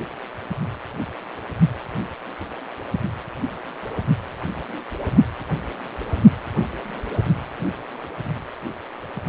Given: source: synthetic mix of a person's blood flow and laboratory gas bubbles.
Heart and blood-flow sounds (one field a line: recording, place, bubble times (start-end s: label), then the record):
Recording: Doppler ultrasound of blood flow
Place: precordium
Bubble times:
no bubbles
From the record:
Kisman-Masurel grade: 000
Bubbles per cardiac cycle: 0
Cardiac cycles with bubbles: 0%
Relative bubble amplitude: no bubbles discernible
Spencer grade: 0 (complete lack of bubble signals)